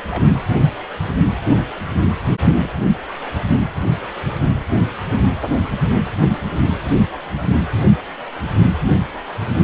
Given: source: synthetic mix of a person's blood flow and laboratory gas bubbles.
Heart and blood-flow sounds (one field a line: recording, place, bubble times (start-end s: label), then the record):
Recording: Doppler ultrasound of blood flow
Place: precordium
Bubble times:
0.10-0.27 s: bubbles
2.62-2.69 s: bubbles
From the record:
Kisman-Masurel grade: 121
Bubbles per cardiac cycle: 1 to 2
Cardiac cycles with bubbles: 10 to 50%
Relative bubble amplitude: barely perceptible (0.100 to 0.250)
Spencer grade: 2 (many but less than half of the cardiac periods contain bubble signals, singularly or in groups)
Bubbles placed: anywhere in the cardiac cycle